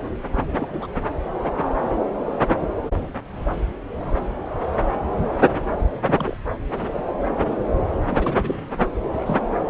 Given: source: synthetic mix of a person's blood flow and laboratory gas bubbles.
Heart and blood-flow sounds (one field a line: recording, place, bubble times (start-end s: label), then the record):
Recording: Doppler ultrasound of blood flow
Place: subclavian vein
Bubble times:
0.52-0.87 s: bubbles
6.05-6.37 s: bubbles
6.73-7.04 s: bubbles
8.03-8.67 s: bubbles
9.07-9.38 s: bubbles
From the record:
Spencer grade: 2 (many but less than half of the cardiac periods contain bubble signals, singularly or in groups)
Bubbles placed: anywhere in the cardiac cycle